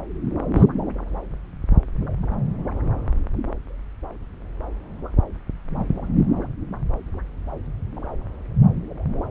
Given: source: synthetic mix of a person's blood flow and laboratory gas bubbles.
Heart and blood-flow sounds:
Doppler ultrasound of blood flow; subclavian vein
0.55-0.66 s: bubbles
From the record:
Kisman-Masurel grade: 113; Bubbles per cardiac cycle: 1 to 2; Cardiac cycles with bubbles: 1 to 10%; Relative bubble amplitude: loud (0.450 to 0.775); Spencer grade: 1 (occasional bubble signal discernible with the cardiac motion signal, with majority of cardiac periods free of bubbles); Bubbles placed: anywhere in the cardiac cycle

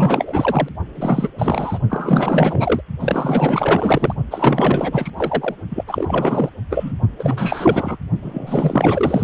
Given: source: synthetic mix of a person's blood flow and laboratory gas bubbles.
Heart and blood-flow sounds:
Doppler ultrasound of blood flow; precordium
0.00-0.69 s: bubbles
0.97-1.29 s: bubbles
1.38-1.79 s: bubbles
1.89-2.81 s: bubbles
3.00-4.14 s: bubbles
4.30-5.10 s: bubbles
5.17-5.55 s: bubbles
5.69-5.84 s: bubbles
5.87-6.50 s: bubbles
6.70-6.93 s: bubbles
7.19-7.97 s: bubbles
8.22-9.24 s: bubbles
From the record:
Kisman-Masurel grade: 444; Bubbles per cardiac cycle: continuous sound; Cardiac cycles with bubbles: 100%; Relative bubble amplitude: maximal (0.775 to 0.999); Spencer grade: 4 (maximum detectable bubble signal sounding continuously throughout systole and diastole of every cardiac period, and overriding the amplitude of the normal cardiac signals); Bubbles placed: only in the low amplitude regions of the cardiac cycle

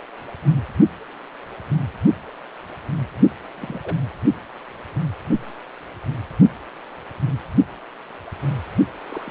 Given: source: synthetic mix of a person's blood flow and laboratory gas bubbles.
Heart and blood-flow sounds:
Doppler ultrasound of blood flow; precordium
3.54-3.96 s: bubbles
9.08-9.31 s: bubbles
From the record:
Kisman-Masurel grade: 121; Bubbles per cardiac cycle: 1 to 2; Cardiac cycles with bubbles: 10 to 50%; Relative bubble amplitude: barely perceptible (0.100 to 0.250); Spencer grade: 2 (many but less than half of the cardiac periods contain bubble signals, singularly or in groups); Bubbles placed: only in the low amplitude regions of the cardiac cycle

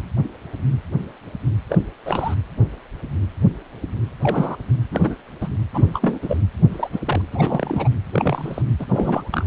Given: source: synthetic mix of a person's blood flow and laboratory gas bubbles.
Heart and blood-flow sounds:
Doppler ultrasound of blood flow; precordium
1.69-1.77 s: bubbles
2.06-2.35 s: bubbles
4.19-4.56 s: bubbles
4.91-5.15 s: bubbles
5.41-5.49 s: bubbles
5.73-6.19 s: bubbles
6.21-6.37 s: bubbles
6.72-6.89 s: bubbles
6.92-6.99 s: bubbles
7.05-7.21 s: bubbles
7.32-7.89 s: bubbles
8.12-8.62 s: bubbles
8.79-8.86 s: bubbles
8.88-9.46 s: bubbles
From the record:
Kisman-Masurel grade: 232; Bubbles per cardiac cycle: several, 3 to 8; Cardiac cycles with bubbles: 50 to 99%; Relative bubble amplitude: moderate (0.250 to 0.450); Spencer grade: 3 (all of the cardiac periods contain showers or single bubble signals, but not dominating or overriding the cardiac motion signals); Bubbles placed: anywhere in the cardiac cycle

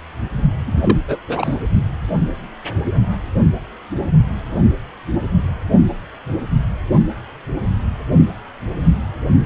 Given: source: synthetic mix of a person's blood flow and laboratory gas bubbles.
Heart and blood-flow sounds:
Doppler ultrasound of blood flow; precordium
0.67-0.72 s: bubbles
0.76-0.98 s: bubbles
1.08-1.18 s: bubbles
1.28-1.56 s: bubbles
From the record:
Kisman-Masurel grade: 212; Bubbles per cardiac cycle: several, 3 to 8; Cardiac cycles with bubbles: 1 to 10%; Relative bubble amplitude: moderate (0.250 to 0.450); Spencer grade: 1 (occasional bubble signal discernible with the cardiac motion signal, with majority of cardiac periods free of bubbles); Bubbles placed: only in the low amplitude regions of the cardiac cycle

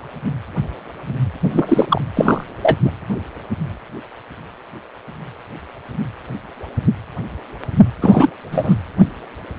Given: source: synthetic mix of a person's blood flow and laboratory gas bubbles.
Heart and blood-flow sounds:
Doppler ultrasound of blood flow; precordium
1.40-1.86 s: bubbles
1.89-2.02 s: bubbles
2.16-2.44 s: bubbles
2.62-2.77 s: bubbles
2.84-2.91 s: bubbles
8.00-8.30 s: bubbles
8.51-8.75 s: bubbles
From the record:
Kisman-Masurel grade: 233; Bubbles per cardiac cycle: several, 3 to 8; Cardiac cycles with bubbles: 50 to 99%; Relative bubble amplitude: loud (0.450 to 0.775); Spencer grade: 3 (all of the cardiac periods contain showers or single bubble signals, but not dominating or overriding the cardiac motion signals); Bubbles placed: anywhere in the cardiac cycle

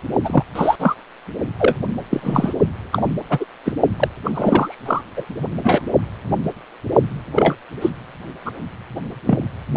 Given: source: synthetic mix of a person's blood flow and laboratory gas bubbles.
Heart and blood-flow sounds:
Doppler ultrasound of blood flow; precordium
0.24-0.43 s: bubbles
0.55-0.76 s: bubbles
0.79-0.95 s: bubbles
1.58-1.76 s: bubbles
2.10-2.54 s: bubbles
2.92-3.08 s: bubbles
3.29-3.44 s: bubbles
3.65-3.73 s: bubbles
3.99-4.08 s: bubbles
4.24-4.31 s: bubbles
4.33-4.82 s: bubbles
4.85-5.01 s: bubbles
5.17-5.25 s: bubbles
5.63-5.83 s: bubbles
7.35-7.55 s: bubbles
7.81-7.90 s: bubbles
8.45-8.51 s: bubbles
9.26-9.39 s: bubbles
From the record:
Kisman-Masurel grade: 243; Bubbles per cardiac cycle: several, 3 to 8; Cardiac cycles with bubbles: 100%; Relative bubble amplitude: loud (0.450 to 0.775); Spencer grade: 3 (all of the cardiac periods contain showers or single bubble signals, but not dominating or overriding the cardiac motion signals); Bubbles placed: only in the low amplitude regions of the cardiac cycle

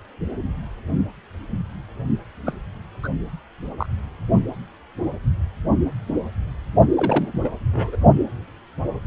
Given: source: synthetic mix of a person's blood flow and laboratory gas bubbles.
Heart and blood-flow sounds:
Doppler ultrasound of blood flow; precordium
2.45-2.54 s: bubbles
3.02-3.08 s: bubbles
3.78-3.87 s: bubbles
6.95-7.30 s: bubbles
7.33-7.40 s: bubbles
7.44-7.49 s: bubbles
7.72-7.96 s: bubbles
From the record:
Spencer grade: 2 (many but less than half of the cardiac periods contain bubble signals, singularly or in groups); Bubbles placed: only in the low amplitude regions of the cardiac cycle

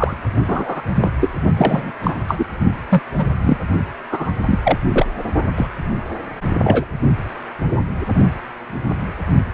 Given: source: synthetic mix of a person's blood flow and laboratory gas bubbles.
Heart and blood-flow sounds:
Doppler ultrasound of blood flow; precordium
0.00-0.14 s: bubbles
0.47-0.81 s: bubbles
0.95-1.10 s: bubbles
1.21-1.29 s: bubbles
1.57-1.92 s: bubbles
2.02-2.15 s: bubbles
2.28-2.46 s: bubbles
2.88-3.02 s: bubbles
3.17-3.25 s: bubbles
3.42-3.57 s: bubbles
4.10-4.32 s: bubbles
4.39-4.78 s: bubbles
4.87-5.06 s: bubbles
5.57-5.67 s: bubbles
6.63-6.85 s: bubbles
From the record:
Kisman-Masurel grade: 233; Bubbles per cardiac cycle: several, 3 to 8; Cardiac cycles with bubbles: 50 to 99%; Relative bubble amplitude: loud (0.450 to 0.775); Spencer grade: 3 (all of the cardiac periods contain showers or single bubble signals, but not dominating or overriding the cardiac motion signals); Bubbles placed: only in the low amplitude regions of the cardiac cycle

